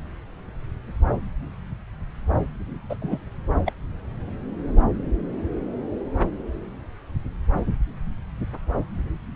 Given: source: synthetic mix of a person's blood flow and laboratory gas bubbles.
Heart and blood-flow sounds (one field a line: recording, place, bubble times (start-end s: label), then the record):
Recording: Doppler ultrasound of blood flow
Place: subclavian vein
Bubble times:
2.89-2.96 s: bubbles
3.02-3.19 s: bubbles
3.66-3.71 s: bubbles
From the record:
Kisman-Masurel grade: 222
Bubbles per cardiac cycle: several, 3 to 8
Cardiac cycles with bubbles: 10 to 50%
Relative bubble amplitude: moderate (0.250 to 0.450)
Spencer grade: 2 (many but less than half of the cardiac periods contain bubble signals, singularly or in groups)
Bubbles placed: anywhere in the cardiac cycle